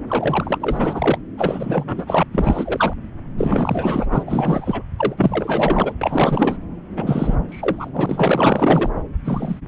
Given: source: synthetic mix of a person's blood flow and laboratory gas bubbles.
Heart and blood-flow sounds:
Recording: Doppler ultrasound of blood flow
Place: subclavian vein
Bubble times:
0.07-1.18 s: bubbles
1.37-2.23 s: bubbles
2.32-2.93 s: bubbles
3.35-4.05 s: bubbles
4.10-4.23 s: bubbles
4.26-4.82 s: bubbles
4.97-5.94 s: bubbles
6.01-6.58 s: bubbles
6.96-7.36 s: bubbles
7.48-7.91 s: bubbles
7.93-8.90 s: bubbles
9.25-9.61 s: bubbles
From the record:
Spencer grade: 4 (maximum detectable bubble signal sounding continuously throughout systole and diastole of every cardiac period, and overriding the amplitude of the normal cardiac signals)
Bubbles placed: anywhere in the cardiac cycle

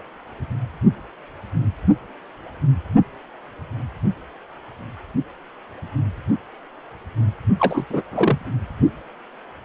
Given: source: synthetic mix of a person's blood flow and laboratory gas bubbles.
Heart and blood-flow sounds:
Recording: Doppler ultrasound of blood flow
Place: precordium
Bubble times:
7.58-7.85 s: bubbles
7.90-8.01 s: bubbles
8.12-8.38 s: bubbles
From the record:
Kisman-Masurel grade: 212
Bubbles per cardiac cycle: several, 3 to 8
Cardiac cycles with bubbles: 1 to 10%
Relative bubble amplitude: moderate (0.250 to 0.450)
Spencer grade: 1 (occasional bubble signal discernible with the cardiac motion signal, with majority of cardiac periods free of bubbles)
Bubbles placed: only in the low amplitude regions of the cardiac cycle

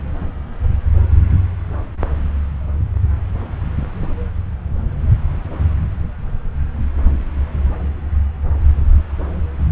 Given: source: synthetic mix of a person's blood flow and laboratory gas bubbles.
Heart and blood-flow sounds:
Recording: Doppler ultrasound of blood flow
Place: subclavian vein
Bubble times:
no bubbles
From the record:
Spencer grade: 0 (complete lack of bubble signals)

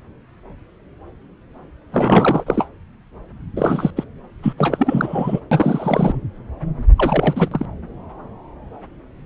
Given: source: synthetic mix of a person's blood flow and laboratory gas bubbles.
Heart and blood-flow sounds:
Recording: Doppler ultrasound of blood flow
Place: subclavian vein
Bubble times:
1.91-2.43 s: bubbles
2.46-2.67 s: bubbles
3.56-3.90 s: bubbles
3.96-4.04 s: bubbles
4.42-4.53 s: bubbles
4.58-5.39 s: bubbles
5.51-6.17 s: bubbles
6.96-7.65 s: bubbles
From the record:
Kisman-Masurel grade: 333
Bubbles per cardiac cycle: rolling drumbeat, 9 or more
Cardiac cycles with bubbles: 50 to 99%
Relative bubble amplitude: loud (0.450 to 0.775)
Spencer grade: 3 (all of the cardiac periods contain showers or single bubble signals, but not dominating or overriding the cardiac motion signals)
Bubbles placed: anywhere in the cardiac cycle

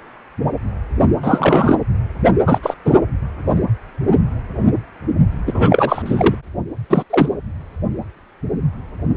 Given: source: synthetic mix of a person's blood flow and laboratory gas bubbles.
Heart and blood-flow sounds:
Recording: Doppler ultrasound of blood flow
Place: precordium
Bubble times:
1.23-1.76 s: bubbles
2.46-2.74 s: bubbles
2.85-2.94 s: bubbles
5.46-6.02 s: bubbles
6.05-6.35 s: bubbles
6.89-7.03 s: bubbles
7.09-7.29 s: bubbles
From the record:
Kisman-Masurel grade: 223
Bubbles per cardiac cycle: several, 3 to 8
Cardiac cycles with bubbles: 10 to 50%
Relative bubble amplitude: loud (0.450 to 0.775)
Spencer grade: 2 (many but less than half of the cardiac periods contain bubble signals, singularly or in groups)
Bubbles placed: anywhere in the cardiac cycle

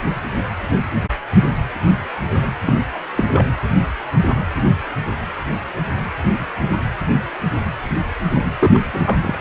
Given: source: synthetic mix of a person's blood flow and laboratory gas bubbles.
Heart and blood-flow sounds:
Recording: Doppler ultrasound of blood flow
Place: precordium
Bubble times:
2.66-2.75 s: bubbles
2.94-2.98 s: bubbles
3.17-3.24 s: bubbles
3.28-3.44 s: bubbles
8.31-8.43 s: bubbles
8.59-8.79 s: bubbles
8.93-9.00 s: bubbles
9.04-9.17 s: bubbles
9.23-9.38 s: bubbles
From the record:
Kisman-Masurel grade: 222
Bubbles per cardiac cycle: several, 3 to 8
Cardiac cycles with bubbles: 10 to 50%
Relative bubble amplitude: moderate (0.250 to 0.450)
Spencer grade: 2 (many but less than half of the cardiac periods contain bubble signals, singularly or in groups)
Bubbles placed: anywhere in the cardiac cycle

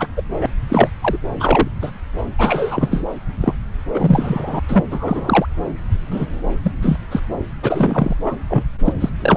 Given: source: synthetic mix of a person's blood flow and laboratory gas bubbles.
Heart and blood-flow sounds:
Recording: Doppler ultrasound of blood flow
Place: subclavian vein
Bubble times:
0.00-0.08 s: bubbles
0.16-0.23 s: bubbles
0.39-0.46 s: bubbles
0.69-0.88 s: bubbles
1.01-1.17 s: bubbles
1.40-1.68 s: bubbles
1.81-1.91 s: bubbles
2.38-3.04 s: bubbles
3.40-3.54 s: bubbles
3.94-4.59 s: bubbles
4.68-4.84 s: bubbles
4.91-5.46 s: bubbles
6.11-6.25 s: bubbles
6.63-6.72 s: bubbles
6.82-6.97 s: bubbles
7.11-7.20 s: bubbles
7.62-8.14 s: bubbles
8.24-8.36 s: bubbles
8.50-8.63 s: bubbles
8.85-8.93 s: bubbles
9.00-9.10 s: bubbles
9.21-9.37 s: bubbles
From the record:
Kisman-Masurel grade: 233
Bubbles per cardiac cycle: several, 3 to 8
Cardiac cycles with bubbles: 50 to 99%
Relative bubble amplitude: loud (0.450 to 0.775)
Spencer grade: 3 (all of the cardiac periods contain showers or single bubble signals, but not dominating or overriding the cardiac motion signals)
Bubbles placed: anywhere in the cardiac cycle

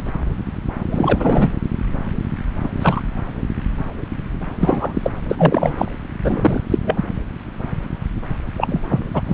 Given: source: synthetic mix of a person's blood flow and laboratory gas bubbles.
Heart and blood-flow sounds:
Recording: Doppler ultrasound of blood flow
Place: subclavian vein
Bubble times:
0.92-1.51 s: bubbles
2.62-2.68 s: bubbles
2.81-3.00 s: bubbles
4.60-5.12 s: bubbles
5.29-5.90 s: bubbles
6.23-6.62 s: bubbles
6.70-6.78 s: bubbles
6.84-7.04 s: bubbles
8.57-8.82 s: bubbles
8.89-9.07 s: bubbles
9.13-9.21 s: bubbles
9.26-9.34 s: bubbles
From the record:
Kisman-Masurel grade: 233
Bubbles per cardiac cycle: several, 3 to 8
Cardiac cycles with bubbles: 50 to 99%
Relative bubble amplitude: loud (0.450 to 0.775)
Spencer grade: 3 (all of the cardiac periods contain showers or single bubble signals, but not dominating or overriding the cardiac motion signals)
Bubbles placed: anywhere in the cardiac cycle

